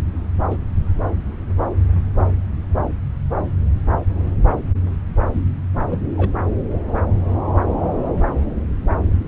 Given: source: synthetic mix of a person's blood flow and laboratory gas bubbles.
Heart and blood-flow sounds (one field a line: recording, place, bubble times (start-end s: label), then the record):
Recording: Doppler ultrasound of blood flow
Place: subclavian vein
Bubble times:
0.50-0.57 s: bubbles
5.33-5.41 s: bubbles
5.89-6.02 s: bubbles
6.17-6.29 s: bubbles
From the record:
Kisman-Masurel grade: 121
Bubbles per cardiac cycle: 1 to 2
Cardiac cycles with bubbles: 10 to 50%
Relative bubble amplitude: barely perceptible (0.100 to 0.250)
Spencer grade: 2 (many but less than half of the cardiac periods contain bubble signals, singularly or in groups)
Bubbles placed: anywhere in the cardiac cycle